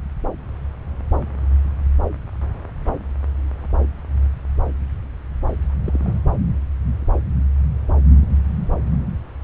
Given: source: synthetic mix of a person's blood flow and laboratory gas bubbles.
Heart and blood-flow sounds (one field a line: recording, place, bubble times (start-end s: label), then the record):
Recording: Doppler ultrasound of blood flow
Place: subclavian vein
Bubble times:
5.85-6.00 s: bubbles
6.04-6.20 s: bubbles
9.42-9.44 s: bubbles
From the record:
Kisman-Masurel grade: 121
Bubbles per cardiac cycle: 1 to 2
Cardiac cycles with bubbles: 10 to 50%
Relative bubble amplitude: barely perceptible (0.100 to 0.250)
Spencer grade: 2 (many but less than half of the cardiac periods contain bubble signals, singularly or in groups)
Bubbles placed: anywhere in the cardiac cycle